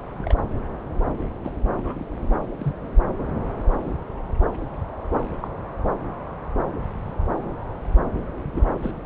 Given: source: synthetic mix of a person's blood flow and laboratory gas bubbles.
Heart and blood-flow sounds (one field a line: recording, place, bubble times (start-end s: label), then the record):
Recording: Doppler ultrasound of blood flow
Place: subclavian vein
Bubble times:
0.21-0.35 s: bubbles
1.44-1.52 s: bubbles
1.76-2.05 s: bubbles
2.62-2.74 s: bubbles
5.40-5.48 s: bubbles
8.43-8.64 s: bubbles
8.82-8.91 s: bubbles
From the record:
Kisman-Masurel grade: 121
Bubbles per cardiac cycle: 1 to 2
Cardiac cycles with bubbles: 10 to 50%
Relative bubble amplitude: barely perceptible (0.100 to 0.250)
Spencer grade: 2 (many but less than half of the cardiac periods contain bubble signals, singularly or in groups)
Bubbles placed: anywhere in the cardiac cycle